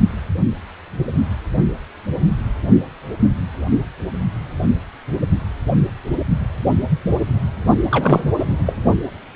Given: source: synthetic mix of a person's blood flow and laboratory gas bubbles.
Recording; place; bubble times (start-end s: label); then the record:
Doppler ultrasound of blood flow; precordium
7.90-8.21 s: bubbles
8.23-8.29 s: bubbles
8.39-8.46 s: bubbles
8.66-8.74 s: bubbles
From the record:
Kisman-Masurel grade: 213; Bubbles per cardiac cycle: several, 3 to 8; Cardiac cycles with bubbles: 1 to 10%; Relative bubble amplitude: loud (0.450 to 0.775); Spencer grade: 1 (occasional bubble signal discernible with the cardiac motion signal, with majority of cardiac periods free of bubbles); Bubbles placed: only in the low amplitude regions of the cardiac cycle